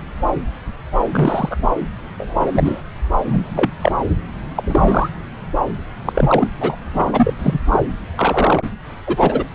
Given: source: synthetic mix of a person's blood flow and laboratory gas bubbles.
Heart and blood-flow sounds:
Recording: Doppler ultrasound of blood flow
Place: subclavian vein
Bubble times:
1.12-1.57 s: bubbles
2.18-2.82 s: bubbles
3.27-3.71 s: bubbles
3.81-3.92 s: bubbles
4.55-5.09 s: bubbles
6.05-6.47 s: bubbles
6.60-6.76 s: bubbles
6.94-7.33 s: bubbles
7.38-7.60 s: bubbles
7.71-7.85 s: bubbles
8.17-8.62 s: bubbles
9.06-9.44 s: bubbles
From the record:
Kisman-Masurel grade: 233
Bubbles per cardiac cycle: several, 3 to 8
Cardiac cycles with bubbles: 50 to 99%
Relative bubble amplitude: loud (0.450 to 0.775)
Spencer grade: 3 (all of the cardiac periods contain showers or single bubble signals, but not dominating or overriding the cardiac motion signals)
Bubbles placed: anywhere in the cardiac cycle

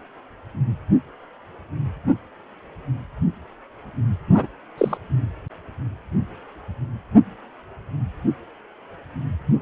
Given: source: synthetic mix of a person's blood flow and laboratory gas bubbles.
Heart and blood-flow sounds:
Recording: Doppler ultrasound of blood flow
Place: precordium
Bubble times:
4.29-4.46 s: bubbles
4.78-4.98 s: bubbles
9.60-9.62 s: bubbles
From the record:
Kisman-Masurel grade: 122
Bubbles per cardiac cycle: 1 to 2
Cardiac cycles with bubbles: 10 to 50%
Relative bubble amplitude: moderate (0.250 to 0.450)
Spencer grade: 2 (many but less than half of the cardiac periods contain bubble signals, singularly or in groups)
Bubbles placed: anywhere in the cardiac cycle

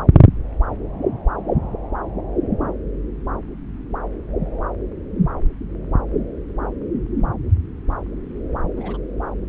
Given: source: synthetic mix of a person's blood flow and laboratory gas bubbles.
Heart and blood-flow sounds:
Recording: Doppler ultrasound of blood flow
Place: subclavian vein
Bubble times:
8.77-8.97 s: bubbles
From the record:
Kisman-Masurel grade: 121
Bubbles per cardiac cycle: 1 to 2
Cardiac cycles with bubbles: 10 to 50%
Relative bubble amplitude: barely perceptible (0.100 to 0.250)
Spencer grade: 2 (many but less than half of the cardiac periods contain bubble signals, singularly or in groups)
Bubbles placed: anywhere in the cardiac cycle

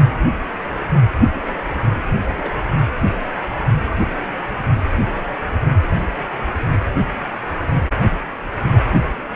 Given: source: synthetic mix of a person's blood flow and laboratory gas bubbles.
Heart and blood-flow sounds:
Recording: Doppler ultrasound of blood flow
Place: precordium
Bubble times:
1.34-1.44 s: bubbles
1.47-1.58 s: bubbles
1.81-1.90 s: bubbles
2.25-2.29 s: bubbles
2.37-2.59 s: bubbles
From the record:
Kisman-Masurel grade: 211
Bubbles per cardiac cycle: several, 3 to 8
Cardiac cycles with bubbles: 1 to 10%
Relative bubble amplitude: barely perceptible (0.100 to 0.250)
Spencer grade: 1 (occasional bubble signal discernible with the cardiac motion signal, with majority of cardiac periods free of bubbles)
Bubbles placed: only in the low amplitude regions of the cardiac cycle

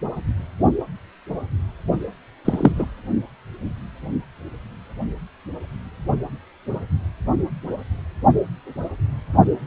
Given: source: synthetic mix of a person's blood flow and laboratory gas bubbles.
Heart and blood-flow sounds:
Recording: Doppler ultrasound of blood flow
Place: precordium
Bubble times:
2.44-2.72 s: bubbles
2.75-2.85 s: bubbles
From the record:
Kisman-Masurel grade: 113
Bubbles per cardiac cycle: 1 to 2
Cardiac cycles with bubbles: 1 to 10%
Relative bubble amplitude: loud (0.450 to 0.775)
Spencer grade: 1 (occasional bubble signal discernible with the cardiac motion signal, with majority of cardiac periods free of bubbles)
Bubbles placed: anywhere in the cardiac cycle

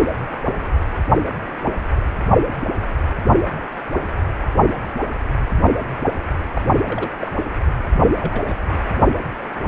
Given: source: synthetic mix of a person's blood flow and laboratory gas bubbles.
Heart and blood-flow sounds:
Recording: Doppler ultrasound of blood flow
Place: precordium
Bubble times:
6.54-6.62 s: bubbles
6.88-7.10 s: bubbles
7.21-7.32 s: bubbles
7.96-8.55 s: bubbles
From the record:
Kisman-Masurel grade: 121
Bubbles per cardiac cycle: 1 to 2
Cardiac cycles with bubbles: 10 to 50%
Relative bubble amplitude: barely perceptible (0.100 to 0.250)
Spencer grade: 2 (many but less than half of the cardiac periods contain bubble signals, singularly or in groups)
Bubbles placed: anywhere in the cardiac cycle

